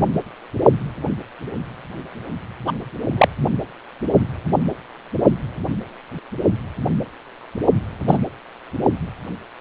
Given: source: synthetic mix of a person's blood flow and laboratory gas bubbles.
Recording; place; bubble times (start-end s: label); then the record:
Doppler ultrasound of blood flow; precordium
2.67-2.72 s: bubbles
3.17-3.28 s: bubbles
8.07-8.18 s: bubbles
From the record:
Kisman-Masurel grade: 123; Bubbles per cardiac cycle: 1 to 2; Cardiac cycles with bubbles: 10 to 50%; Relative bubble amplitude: loud (0.450 to 0.775); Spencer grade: 2 (many but less than half of the cardiac periods contain bubble signals, singularly or in groups); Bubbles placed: only in the low amplitude regions of the cardiac cycle